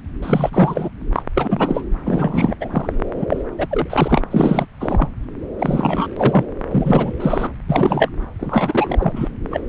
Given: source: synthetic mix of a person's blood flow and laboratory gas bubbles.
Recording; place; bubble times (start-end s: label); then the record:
Doppler ultrasound of blood flow; subclavian vein
0.22-0.89 s: bubbles
1.14-1.23 s: bubbles
1.34-1.82 s: bubbles
2.04-2.55 s: bubbles
2.60-2.93 s: bubbles
3.15-3.26 s: bubbles
3.29-3.42 s: bubbles
3.58-3.67 s: bubbles
3.71-4.21 s: bubbles
4.30-4.65 s: bubbles
4.80-5.07 s: bubbles
5.58-6.07 s: bubbles
6.17-6.45 s: bubbles
6.71-7.13 s: bubbles
7.19-7.51 s: bubbles
7.69-8.09 s: bubbles
8.38-9.29 s: bubbles
9.50-9.61 s: bubbles
From the record:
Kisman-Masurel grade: 343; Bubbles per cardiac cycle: rolling drumbeat, 9 or more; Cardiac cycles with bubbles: 100%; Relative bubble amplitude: loud (0.450 to 0.775); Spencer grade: 3 (all of the cardiac periods contain showers or single bubble signals, but not dominating or overriding the cardiac motion signals); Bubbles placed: anywhere in the cardiac cycle